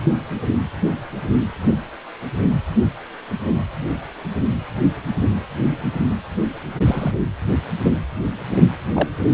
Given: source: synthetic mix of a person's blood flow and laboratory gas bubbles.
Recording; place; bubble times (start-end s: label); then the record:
Doppler ultrasound of blood flow; precordium
6.85-7.12 s: bubbles
8.93-9.08 s: bubbles
From the record:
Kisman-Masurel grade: 123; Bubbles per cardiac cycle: 1 to 2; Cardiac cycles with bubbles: 10 to 50%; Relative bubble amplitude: loud (0.450 to 0.775); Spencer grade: 2 (many but less than half of the cardiac periods contain bubble signals, singularly or in groups); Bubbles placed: anywhere in the cardiac cycle